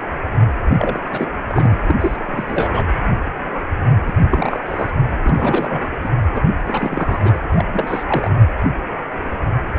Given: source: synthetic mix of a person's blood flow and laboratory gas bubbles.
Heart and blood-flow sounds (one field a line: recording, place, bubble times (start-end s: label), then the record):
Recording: Doppler ultrasound of blood flow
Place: precordium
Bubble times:
0.78-1.06 s: bubbles
1.12-1.27 s: bubbles
1.47-1.77 s: bubbles
1.88-1.95 s: bubbles
2.01-2.17 s: bubbles
2.26-2.46 s: bubbles
2.48-2.85 s: bubbles
4.07-4.12 s: bubbles
4.17-4.28 s: bubbles
4.30-4.91 s: bubbles
5.24-5.88 s: bubbles
6.00-6.08 s: bubbles
6.33-6.43 s: bubbles
6.48-6.53 s: bubbles
6.66-7.38 s: bubbles
7.48-7.65 s: bubbles
7.73-8.04 s: bubbles
8.07-8.45 s: bubbles
From the record:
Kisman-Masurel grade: 332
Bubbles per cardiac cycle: rolling drumbeat, 9 or more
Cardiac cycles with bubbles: 50 to 99%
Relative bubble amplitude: moderate (0.250 to 0.450)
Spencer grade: 3 (all of the cardiac periods contain showers or single bubble signals, but not dominating or overriding the cardiac motion signals)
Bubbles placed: anywhere in the cardiac cycle